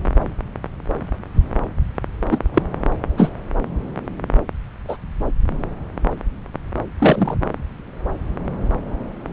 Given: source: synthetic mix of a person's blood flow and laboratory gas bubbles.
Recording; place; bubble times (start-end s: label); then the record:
Doppler ultrasound of blood flow; subclavian vein
2.29-2.39 s: bubbles
2.54-2.62 s: bubbles
3.18-3.30 s: bubbles
4.88-4.97 s: bubbles
6.98-7.38 s: bubbles
From the record:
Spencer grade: 2 (many but less than half of the cardiac periods contain bubble signals, singularly or in groups); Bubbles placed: anywhere in the cardiac cycle